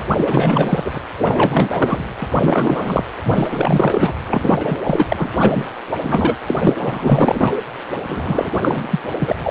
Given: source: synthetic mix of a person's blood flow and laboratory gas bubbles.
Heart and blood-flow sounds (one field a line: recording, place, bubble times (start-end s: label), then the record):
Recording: Doppler ultrasound of blood flow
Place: precordium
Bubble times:
0.08-0.99 s: bubbles
1.17-2.09 s: bubbles
2.19-3.04 s: bubbles
3.23-4.13 s: bubbles
4.27-4.80 s: bubbles
4.83-5.29 s: bubbles
5.37-5.74 s: bubbles
5.87-5.96 s: bubbles
6.03-6.37 s: bubbles
6.47-6.55 s: bubbles
6.60-6.75 s: bubbles
6.78-7.54 s: bubbles
8.07-9.01 s: bubbles
9.19-9.36 s: bubbles
9.43-9.50 s: bubbles
From the record:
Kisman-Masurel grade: 444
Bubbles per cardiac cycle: continuous sound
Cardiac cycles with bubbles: 100%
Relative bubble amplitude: maximal (0.775 to 0.999)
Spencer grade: 4 (maximum detectable bubble signal sounding continuously throughout systole and diastole of every cardiac period, and overriding the amplitude of the normal cardiac signals)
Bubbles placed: anywhere in the cardiac cycle